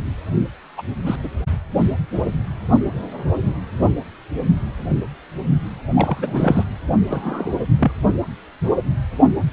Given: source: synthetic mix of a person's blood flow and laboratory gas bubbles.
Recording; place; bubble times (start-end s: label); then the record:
Doppler ultrasound of blood flow; precordium
0.78-0.82 s: bubbles
1.06-1.16 s: bubbles
1.23-1.30 s: bubbles
5.94-6.64 s: bubbles
7.08-7.54 s: bubbles
7.79-7.92 s: bubbles
From the record:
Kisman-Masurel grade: 222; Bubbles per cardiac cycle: several, 3 to 8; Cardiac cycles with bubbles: 10 to 50%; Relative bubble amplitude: moderate (0.250 to 0.450); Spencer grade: 2 (many but less than half of the cardiac periods contain bubble signals, singularly or in groups); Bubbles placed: anywhere in the cardiac cycle